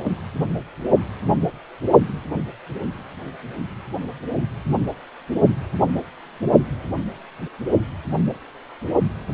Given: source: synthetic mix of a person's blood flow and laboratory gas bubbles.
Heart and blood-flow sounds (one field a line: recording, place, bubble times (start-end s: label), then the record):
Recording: Doppler ultrasound of blood flow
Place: precordium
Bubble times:
0.00-0.12 s: bubbles
From the record:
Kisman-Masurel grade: 212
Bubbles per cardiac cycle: several, 3 to 8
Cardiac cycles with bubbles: 1 to 10%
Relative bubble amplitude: moderate (0.250 to 0.450)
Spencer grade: 1 (occasional bubble signal discernible with the cardiac motion signal, with majority of cardiac periods free of bubbles)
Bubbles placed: only in the low amplitude regions of the cardiac cycle